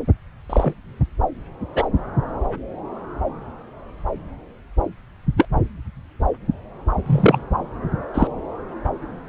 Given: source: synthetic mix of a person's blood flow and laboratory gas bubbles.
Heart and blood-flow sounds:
Doppler ultrasound of blood flow; subclavian vein
0.49-0.74 s: bubbles
1.74-1.87 s: bubbles
5.37-5.47 s: bubbles
7.06-7.39 s: bubbles
8.14-8.28 s: bubbles
From the record:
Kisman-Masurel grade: 123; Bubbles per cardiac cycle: 1 to 2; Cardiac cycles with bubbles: 10 to 50%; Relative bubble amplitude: loud (0.450 to 0.775); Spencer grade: 2 (many but less than half of the cardiac periods contain bubble signals, singularly or in groups); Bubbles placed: anywhere in the cardiac cycle

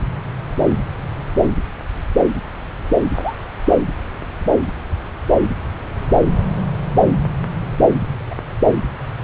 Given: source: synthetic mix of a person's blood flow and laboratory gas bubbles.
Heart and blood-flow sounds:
Doppler ultrasound of blood flow; subclavian vein
3.14-3.35 s: bubbles
8.30-8.35 s: bubbles
From the record:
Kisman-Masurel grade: 121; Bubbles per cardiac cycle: 1 to 2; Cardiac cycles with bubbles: 10 to 50%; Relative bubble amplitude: barely perceptible (0.100 to 0.250); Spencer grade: 2 (many but less than half of the cardiac periods contain bubble signals, singularly or in groups); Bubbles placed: anywhere in the cardiac cycle

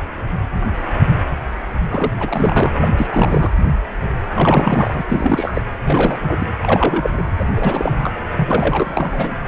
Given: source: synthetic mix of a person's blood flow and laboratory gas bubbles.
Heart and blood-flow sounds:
Doppler ultrasound of blood flow; precordium
1.90-2.10 s: bubbles
2.19-2.69 s: bubbles
2.80-2.88 s: bubbles
2.97-3.07 s: bubbles
3.11-3.50 s: bubbles
4.34-5.03 s: bubbles
5.08-5.62 s: bubbles
5.84-6.17 s: bubbles
6.21-6.47 s: bubbles
6.62-7.23 s: bubbles
7.38-7.45 s: bubbles
7.55-8.11 s: bubbles
8.36-9.35 s: bubbles
From the record:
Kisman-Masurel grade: 332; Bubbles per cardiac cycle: rolling drumbeat, 9 or more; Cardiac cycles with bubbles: 50 to 99%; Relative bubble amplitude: moderate (0.250 to 0.450); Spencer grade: 3 (all of the cardiac periods contain showers or single bubble signals, but not dominating or overriding the cardiac motion signals); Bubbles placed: anywhere in the cardiac cycle

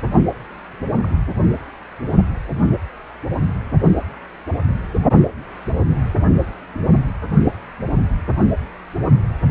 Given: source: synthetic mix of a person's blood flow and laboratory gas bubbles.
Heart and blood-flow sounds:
Doppler ultrasound of blood flow; precordium
1.02-1.10 s: bubbles
From the record:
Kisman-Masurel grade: 111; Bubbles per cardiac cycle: 1 to 2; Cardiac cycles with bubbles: 1 to 10%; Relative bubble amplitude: barely perceptible (0.100 to 0.250); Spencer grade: 1 (occasional bubble signal discernible with the cardiac motion signal, with majority of cardiac periods free of bubbles); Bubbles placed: anywhere in the cardiac cycle

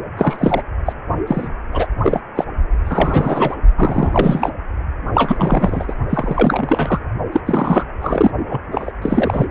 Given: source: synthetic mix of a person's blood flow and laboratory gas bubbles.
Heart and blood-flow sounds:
Doppler ultrasound of blood flow; precordium
0.17-0.62 s: bubbles
0.85-0.92 s: bubbles
1.27-1.48 s: bubbles
1.72-1.88 s: bubbles
2.02-2.20 s: bubbles
2.35-2.44 s: bubbles
2.84-3.55 s: bubbles
3.76-4.50 s: bubbles
5.14-5.94 s: bubbles
6.09-7.00 s: bubbles
7.32-7.41 s: bubbles
7.46-7.83 s: bubbles
8.01-8.31 s: bubbles
8.50-8.60 s: bubbles
8.71-8.92 s: bubbles
9.01-9.46 s: bubbles
From the record:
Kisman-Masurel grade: 343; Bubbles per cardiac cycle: rolling drumbeat, 9 or more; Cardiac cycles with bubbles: 100%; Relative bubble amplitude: loud (0.450 to 0.775); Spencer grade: 3 (all of the cardiac periods contain showers or single bubble signals, but not dominating or overriding the cardiac motion signals); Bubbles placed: only in the low amplitude regions of the cardiac cycle

